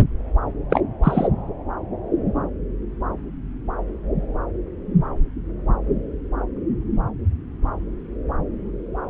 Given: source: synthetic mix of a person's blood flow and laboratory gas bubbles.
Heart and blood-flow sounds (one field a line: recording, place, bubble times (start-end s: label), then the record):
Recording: Doppler ultrasound of blood flow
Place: subclavian vein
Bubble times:
0.70-0.81 s: bubbles
1.04-1.28 s: bubbles
From the record:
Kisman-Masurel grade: 123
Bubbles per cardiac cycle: 1 to 2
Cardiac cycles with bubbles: 10 to 50%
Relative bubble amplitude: loud (0.450 to 0.775)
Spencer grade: 2 (many but less than half of the cardiac periods contain bubble signals, singularly or in groups)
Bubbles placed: anywhere in the cardiac cycle